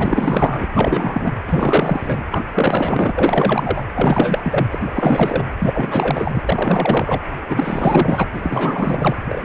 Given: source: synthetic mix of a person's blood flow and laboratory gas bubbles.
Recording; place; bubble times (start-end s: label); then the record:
Doppler ultrasound of blood flow; precordium
0.00-0.68 s: bubbles
0.72-1.41 s: bubbles
1.47-2.23 s: bubbles
2.31-2.43 s: bubbles
2.51-3.12 s: bubbles
3.15-3.83 s: bubbles
3.94-4.67 s: bubbles
4.73-5.44 s: bubbles
5.58-6.43 s: bubbles
6.48-7.22 s: bubbles
7.48-8.27 s: bubbles
8.33-9.16 s: bubbles
9.28-9.45 s: bubbles
From the record:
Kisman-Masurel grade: 444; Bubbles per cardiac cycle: continuous sound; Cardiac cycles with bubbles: 100%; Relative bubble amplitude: maximal (0.775 to 0.999); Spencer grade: 4 (maximum detectable bubble signal sounding continuously throughout systole and diastole of every cardiac period, and overriding the amplitude of the normal cardiac signals); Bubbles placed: anywhere in the cardiac cycle